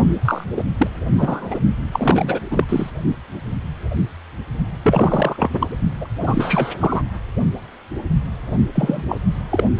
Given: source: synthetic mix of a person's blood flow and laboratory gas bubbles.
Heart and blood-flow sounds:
Doppler ultrasound of blood flow; precordium
0.09-0.17 s: bubbles
0.25-0.44 s: bubbles
0.56-0.64 s: bubbles
0.77-0.87 s: bubbles
1.18-1.60 s: bubbles
1.92-2.40 s: bubbles
2.50-2.65 s: bubbles
2.69-2.90 s: bubbles
4.82-5.67 s: bubbles
6.00-6.07 s: bubbles
6.19-6.72 s: bubbles
6.80-7.03 s: bubbles
8.75-9.02 s: bubbles
9.08-9.17 s: bubbles
9.49-9.64 s: bubbles
9.76-9.80 s: bubbles
From the record:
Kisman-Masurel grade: 333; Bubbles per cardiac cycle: rolling drumbeat, 9 or more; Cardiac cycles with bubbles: 50 to 99%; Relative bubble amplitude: loud (0.450 to 0.775); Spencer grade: 3 (all of the cardiac periods contain showers or single bubble signals, but not dominating or overriding the cardiac motion signals); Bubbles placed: only in the low amplitude regions of the cardiac cycle

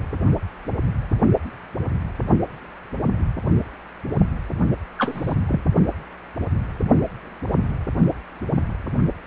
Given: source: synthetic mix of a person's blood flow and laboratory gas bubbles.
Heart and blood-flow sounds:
Doppler ultrasound of blood flow; precordium
4.99-5.35 s: bubbles
5.49-5.61 s: bubbles
From the record:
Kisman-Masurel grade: 212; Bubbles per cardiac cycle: several, 3 to 8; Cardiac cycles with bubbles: 1 to 10%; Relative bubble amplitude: moderate (0.250 to 0.450); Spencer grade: 1 (occasional bubble signal discernible with the cardiac motion signal, with majority of cardiac periods free of bubbles); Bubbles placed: only in the low amplitude regions of the cardiac cycle

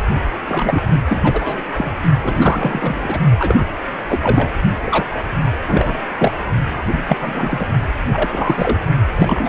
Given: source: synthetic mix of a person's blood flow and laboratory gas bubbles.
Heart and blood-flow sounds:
Doppler ultrasound of blood flow; precordium
0.47-0.82 s: bubbles
0.88-1.01 s: bubbles
1.07-1.61 s: bubbles
1.73-1.93 s: bubbles
2.22-3.20 s: bubbles
3.39-3.65 s: bubbles
4.08-4.50 s: bubbles
4.86-5.05 s: bubbles
5.12-5.23 s: bubbles
5.67-6.04 s: bubbles
6.17-6.32 s: bubbles
6.92-7.04 s: bubbles
7.08-7.67 s: bubbles
8.13-8.29 s: bubbles
8.31-8.80 s: bubbles
9.18-9.49 s: bubbles
From the record:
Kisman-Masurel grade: 333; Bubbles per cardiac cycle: rolling drumbeat, 9 or more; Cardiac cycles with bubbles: 50 to 99%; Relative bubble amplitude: loud (0.450 to 0.775); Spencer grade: 3 (all of the cardiac periods contain showers or single bubble signals, but not dominating or overriding the cardiac motion signals); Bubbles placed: only in the low amplitude regions of the cardiac cycle

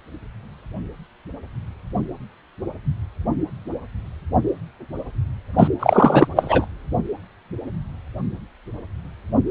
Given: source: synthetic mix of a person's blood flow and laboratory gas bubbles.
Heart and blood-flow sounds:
Doppler ultrasound of blood flow; precordium
5.58-5.68 s: bubbles
5.79-6.28 s: bubbles
6.36-6.67 s: bubbles
From the record:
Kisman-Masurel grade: 213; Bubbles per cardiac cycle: several, 3 to 8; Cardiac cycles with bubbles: 1 to 10%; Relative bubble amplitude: loud (0.450 to 0.775); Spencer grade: 1 (occasional bubble signal discernible with the cardiac motion signal, with majority of cardiac periods free of bubbles); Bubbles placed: only in the low amplitude regions of the cardiac cycle

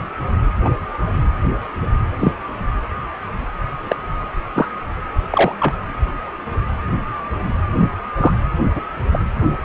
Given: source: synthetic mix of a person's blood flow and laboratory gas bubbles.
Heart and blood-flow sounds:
Doppler ultrasound of blood flow; precordium
0.64-0.70 s: bubbles
2.19-2.32 s: bubbles
3.89-3.95 s: bubbles
4.54-4.67 s: bubbles
5.30-5.53 s: bubbles
5.59-5.74 s: bubbles
7.78-7.90 s: bubbles
8.17-8.33 s: bubbles
8.75-8.82 s: bubbles
9.12-9.20 s: bubbles
From the record:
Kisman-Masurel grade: 123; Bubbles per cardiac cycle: 1 to 2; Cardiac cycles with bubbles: 10 to 50%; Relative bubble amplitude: loud (0.450 to 0.775); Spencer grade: 2 (many but less than half of the cardiac periods contain bubble signals, singularly or in groups); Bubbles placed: anywhere in the cardiac cycle

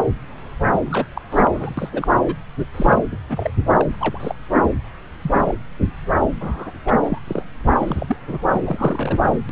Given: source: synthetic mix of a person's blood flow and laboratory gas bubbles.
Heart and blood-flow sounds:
Doppler ultrasound of blood flow; subclavian vein
0.71-0.80 s: bubbles
0.85-1.06 s: bubbles
1.15-1.22 s: bubbles
1.30-1.74 s: bubbles
1.77-1.90 s: bubbles
1.92-2.08 s: bubbles
2.26-2.35 s: bubbles
2.74-2.99 s: bubbles
3.12-3.19 s: bubbles
3.29-3.52 s: bubbles
3.77-3.85 s: bubbles
4.00-4.35 s: bubbles
5.21-5.31 s: bubbles
5.34-5.55 s: bubbles
6.40-6.71 s: bubbles
6.84-6.94 s: bubbles
7.03-7.18 s: bubbles
7.27-7.43 s: bubbles
7.76-8.17 s: bubbles
8.30-8.39 s: bubbles
8.50-8.60 s: bubbles
8.63-9.17 s: bubbles
9.20-9.39 s: bubbles
9.49-9.51 s: bubbles
From the record:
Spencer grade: 3 (all of the cardiac periods contain showers or single bubble signals, but not dominating or overriding the cardiac motion signals); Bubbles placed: anywhere in the cardiac cycle

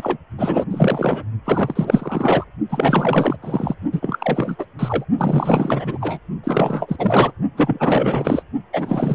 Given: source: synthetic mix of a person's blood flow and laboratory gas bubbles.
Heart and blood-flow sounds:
Doppler ultrasound of blood flow; precordium
0.00-0.17 s: bubbles
0.38-0.65 s: bubbles
0.70-1.23 s: bubbles
1.44-2.44 s: bubbles
2.69-3.36 s: bubbles
3.42-3.74 s: bubbles
3.91-4.56 s: bubbles
4.58-4.65 s: bubbles
4.79-5.04 s: bubbles
5.18-6.19 s: bubbles
6.44-7.32 s: bubbles
7.57-8.43 s: bubbles
8.72-9.15 s: bubbles
From the record:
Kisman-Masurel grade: 444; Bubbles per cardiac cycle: continuous sound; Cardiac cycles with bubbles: 100%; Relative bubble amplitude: maximal (0.775 to 0.999); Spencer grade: 4 (maximum detectable bubble signal sounding continuously throughout systole and diastole of every cardiac period, and overriding the amplitude of the normal cardiac signals); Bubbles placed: only in the low amplitude regions of the cardiac cycle

